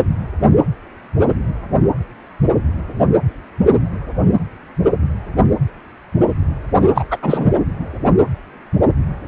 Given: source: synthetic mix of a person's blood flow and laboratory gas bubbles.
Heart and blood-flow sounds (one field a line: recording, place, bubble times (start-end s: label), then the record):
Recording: Doppler ultrasound of blood flow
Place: precordium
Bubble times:
6.95-7.04 s: bubbles
7.10-7.17 s: bubbles
7.22-7.50 s: bubbles
From the record:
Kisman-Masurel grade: 213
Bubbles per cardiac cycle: several, 3 to 8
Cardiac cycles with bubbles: 1 to 10%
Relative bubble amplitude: loud (0.450 to 0.775)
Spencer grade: 1 (occasional bubble signal discernible with the cardiac motion signal, with majority of cardiac periods free of bubbles)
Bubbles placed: anywhere in the cardiac cycle